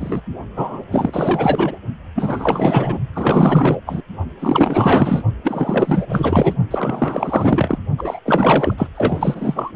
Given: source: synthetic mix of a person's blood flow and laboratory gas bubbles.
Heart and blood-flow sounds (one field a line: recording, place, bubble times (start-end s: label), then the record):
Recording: Doppler ultrasound of blood flow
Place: precordium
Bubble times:
0.00-0.21 s: bubbles
0.56-0.84 s: bubbles
0.91-1.76 s: bubbles
2.15-2.98 s: bubbles
3.13-3.81 s: bubbles
3.86-4.01 s: bubbles
4.39-5.23 s: bubbles
5.43-6.53 s: bubbles
6.71-7.78 s: bubbles
7.97-8.20 s: bubbles
8.25-8.74 s: bubbles
8.78-8.88 s: bubbles
8.95-9.71 s: bubbles
From the record:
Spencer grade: 4 (maximum detectable bubble signal sounding continuously throughout systole and diastole of every cardiac period, and overriding the amplitude of the normal cardiac signals)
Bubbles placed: only in the low amplitude regions of the cardiac cycle